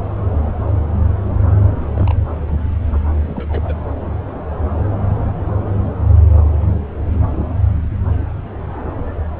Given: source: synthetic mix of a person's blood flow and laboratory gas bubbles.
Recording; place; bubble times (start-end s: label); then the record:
Doppler ultrasound of blood flow; subclavian vein
1.77-2.31 s: bubbles
2.90-3.00 s: bubbles
3.21-3.86 s: bubbles
From the record:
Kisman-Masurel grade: 221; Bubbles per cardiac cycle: several, 3 to 8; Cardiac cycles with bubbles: 10 to 50%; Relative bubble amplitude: barely perceptible (0.100 to 0.250); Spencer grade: 2 (many but less than half of the cardiac periods contain bubble signals, singularly or in groups); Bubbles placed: anywhere in the cardiac cycle